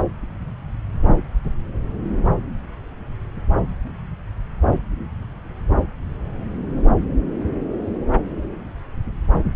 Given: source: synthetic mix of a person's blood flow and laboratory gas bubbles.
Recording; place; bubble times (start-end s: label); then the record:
Doppler ultrasound of blood flow; subclavian vein
no bubbles
From the record:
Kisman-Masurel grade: 000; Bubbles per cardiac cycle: 0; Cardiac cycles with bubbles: 0%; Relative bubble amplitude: no bubbles discernible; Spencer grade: 0 (complete lack of bubble signals)